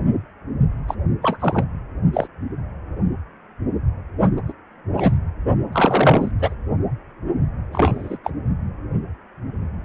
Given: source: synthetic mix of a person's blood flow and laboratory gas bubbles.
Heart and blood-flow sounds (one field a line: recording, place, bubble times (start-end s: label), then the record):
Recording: Doppler ultrasound of blood flow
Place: precordium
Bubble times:
0.87-0.94 s: bubbles
1.22-1.66 s: bubbles
2.13-2.28 s: bubbles
4.20-4.29 s: bubbles
4.37-4.42 s: bubbles
4.48-4.53 s: bubbles
4.97-5.18 s: bubbles
5.72-6.32 s: bubbles
6.39-6.54 s: bubbles
7.73-8.18 s: bubbles
8.23-8.32 s: bubbles
From the record:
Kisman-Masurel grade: 233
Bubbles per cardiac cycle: several, 3 to 8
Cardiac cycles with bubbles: 50 to 99%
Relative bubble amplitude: loud (0.450 to 0.775)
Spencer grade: 3 (all of the cardiac periods contain showers or single bubble signals, but not dominating or overriding the cardiac motion signals)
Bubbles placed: anywhere in the cardiac cycle